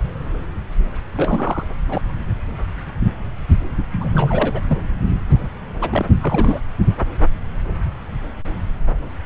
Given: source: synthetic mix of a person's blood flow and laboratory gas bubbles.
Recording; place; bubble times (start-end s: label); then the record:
Doppler ultrasound of blood flow; subclavian vein
1.15-1.67 s: bubbles
1.89-2.02 s: bubbles
3.99-4.79 s: bubbles
5.32-5.47 s: bubbles
5.81-6.05 s: bubbles
6.21-6.61 s: bubbles
From the record:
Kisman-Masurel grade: 222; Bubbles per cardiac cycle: several, 3 to 8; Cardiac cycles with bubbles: 10 to 50%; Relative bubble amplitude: moderate (0.250 to 0.450); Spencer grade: 2 (many but less than half of the cardiac periods contain bubble signals, singularly or in groups); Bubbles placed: anywhere in the cardiac cycle